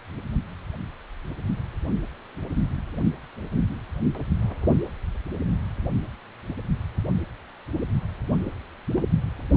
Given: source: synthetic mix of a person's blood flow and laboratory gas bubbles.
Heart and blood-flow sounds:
Doppler ultrasound of blood flow; precordium
8.92-9.03 s: bubbles
9.12-9.16 s: bubbles
From the record:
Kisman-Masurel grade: 111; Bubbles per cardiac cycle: 1 to 2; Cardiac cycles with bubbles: 1 to 10%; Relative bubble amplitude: barely perceptible (0.100 to 0.250); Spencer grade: 1 (occasional bubble signal discernible with the cardiac motion signal, with majority of cardiac periods free of bubbles); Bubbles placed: only in the low amplitude regions of the cardiac cycle

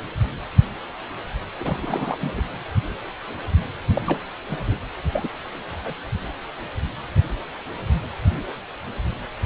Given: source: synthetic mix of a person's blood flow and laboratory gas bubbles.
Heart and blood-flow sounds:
Doppler ultrasound of blood flow; precordium
1.59-1.79 s: bubbles
1.82-2.43 s: bubbles
3.94-4.02 s: bubbles
4.04-4.19 s: bubbles
4.49-4.58 s: bubbles
4.67-4.75 s: bubbles
5.11-5.29 s: bubbles
5.84-5.94 s: bubbles
From the record:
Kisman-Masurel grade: 222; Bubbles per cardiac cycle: several, 3 to 8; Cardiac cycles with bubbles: 10 to 50%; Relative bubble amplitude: moderate (0.250 to 0.450); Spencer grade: 2 (many but less than half of the cardiac periods contain bubble signals, singularly or in groups); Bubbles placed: anywhere in the cardiac cycle

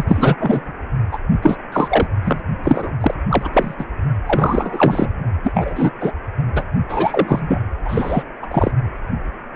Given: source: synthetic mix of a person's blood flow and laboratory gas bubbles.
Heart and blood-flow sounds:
Doppler ultrasound of blood flow; precordium
0.00-0.04 s: bubbles
0.07-0.36 s: bubbles
0.39-0.73 s: bubbles
1.11-1.19 s: bubbles
1.43-1.56 s: bubbles
1.72-2.07 s: bubbles
2.23-2.41 s: bubbles
2.64-2.92 s: bubbles
3.00-3.14 s: bubbles
3.29-3.50 s: bubbles
3.53-3.74 s: bubbles
3.79-3.84 s: bubbles
4.26-5.09 s: bubbles
5.43-5.91 s: bubbles
6.00-6.12 s: bubbles
6.55-6.63 s: bubbles
6.89-7.61 s: bubbles
7.84-8.23 s: bubbles
8.42-8.46 s: bubbles
8.50-8.71 s: bubbles
From the record:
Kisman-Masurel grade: 333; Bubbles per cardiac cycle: rolling drumbeat, 9 or more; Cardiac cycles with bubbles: 50 to 99%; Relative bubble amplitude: loud (0.450 to 0.775); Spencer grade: 3 (all of the cardiac periods contain showers or single bubble signals, but not dominating or overriding the cardiac motion signals); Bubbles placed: only in the low amplitude regions of the cardiac cycle

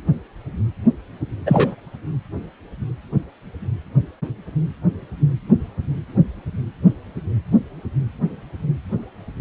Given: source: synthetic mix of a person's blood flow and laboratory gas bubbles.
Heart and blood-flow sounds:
Doppler ultrasound of blood flow; precordium
1.46-1.75 s: bubbles
From the record:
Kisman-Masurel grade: 213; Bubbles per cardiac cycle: several, 3 to 8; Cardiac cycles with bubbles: 1 to 10%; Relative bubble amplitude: loud (0.450 to 0.775); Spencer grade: 1 (occasional bubble signal discernible with the cardiac motion signal, with majority of cardiac periods free of bubbles); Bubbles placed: anywhere in the cardiac cycle

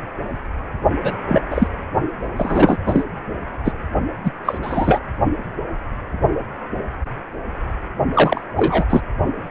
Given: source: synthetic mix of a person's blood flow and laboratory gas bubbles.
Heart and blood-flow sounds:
Doppler ultrasound of blood flow; precordium
1.02-1.14 s: bubbles
1.28-1.42 s: bubbles
1.50-1.67 s: bubbles
2.36-2.78 s: bubbles
2.87-3.04 s: bubbles
3.64-3.72 s: bubbles
4.23-4.32 s: bubbles
4.45-4.58 s: bubbles
4.62-5.01 s: bubbles
8.13-8.41 s: bubbles
8.56-8.86 s: bubbles
8.90-9.01 s: bubbles
From the record:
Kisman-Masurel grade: 233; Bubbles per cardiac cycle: several, 3 to 8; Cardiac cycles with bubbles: 50 to 99%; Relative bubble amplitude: loud (0.450 to 0.775); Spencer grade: 3 (all of the cardiac periods contain showers or single bubble signals, but not dominating or overriding the cardiac motion signals); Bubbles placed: only in the low amplitude regions of the cardiac cycle

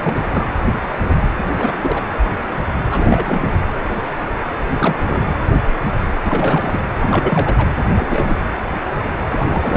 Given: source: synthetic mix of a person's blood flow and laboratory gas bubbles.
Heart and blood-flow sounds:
Doppler ultrasound of blood flow; precordium
0.00-0.24 s: bubbles
0.30-0.47 s: bubbles
1.38-2.02 s: bubbles
2.91-3.53 s: bubbles
4.70-5.23 s: bubbles
6.24-6.80 s: bubbles
6.99-7.71 s: bubbles
7.80-7.83 s: bubbles
7.96-8.35 s: bubbles
9.27-9.77 s: bubbles
From the record:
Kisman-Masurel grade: 332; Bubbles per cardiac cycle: rolling drumbeat, 9 or more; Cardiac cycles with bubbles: 50 to 99%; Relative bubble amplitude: moderate (0.250 to 0.450); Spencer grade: 3 (all of the cardiac periods contain showers or single bubble signals, but not dominating or overriding the cardiac motion signals); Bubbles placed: anywhere in the cardiac cycle

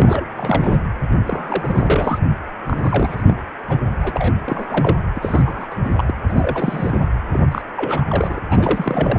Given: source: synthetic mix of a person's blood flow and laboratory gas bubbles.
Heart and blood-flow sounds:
Doppler ultrasound of blood flow; precordium
0.00-0.26 s: bubbles
0.37-0.80 s: bubbles
1.25-2.19 s: bubbles
2.66-3.24 s: bubbles
3.27-3.34 s: bubbles
3.68-3.80 s: bubbles
3.98-4.33 s: bubbles
4.47-4.96 s: bubbles
5.15-5.67 s: bubbles
5.71-5.75 s: bubbles
5.83-5.93 s: bubbles
5.96-6.14 s: bubbles
6.28-6.99 s: bubbles
7.32-7.39 s: bubbles
7.51-7.62 s: bubbles
7.76-8.04 s: bubbles
8.08-8.40 s: bubbles
8.49-9.19 s: bubbles
From the record:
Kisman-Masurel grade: 342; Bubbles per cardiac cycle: rolling drumbeat, 9 or more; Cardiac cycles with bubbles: 100%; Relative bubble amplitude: moderate (0.250 to 0.450); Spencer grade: 3 (all of the cardiac periods contain showers or single bubble signals, but not dominating or overriding the cardiac motion signals); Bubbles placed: anywhere in the cardiac cycle

